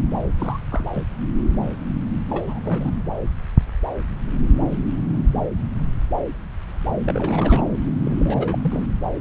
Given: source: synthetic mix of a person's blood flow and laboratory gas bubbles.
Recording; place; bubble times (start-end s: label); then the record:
Doppler ultrasound of blood flow; subclavian vein
0.39-0.59 s: bubbles
0.71-0.90 s: bubbles
0.94-1.02 s: bubbles
2.29-2.59 s: bubbles
2.65-2.92 s: bubbles
7.05-7.62 s: bubbles
8.05-8.58 s: bubbles
8.63-8.85 s: bubbles
From the record:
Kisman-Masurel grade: 221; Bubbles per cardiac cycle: several, 3 to 8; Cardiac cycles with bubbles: 10 to 50%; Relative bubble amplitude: barely perceptible (0.100 to 0.250); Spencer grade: 2 (many but less than half of the cardiac periods contain bubble signals, singularly or in groups); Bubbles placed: anywhere in the cardiac cycle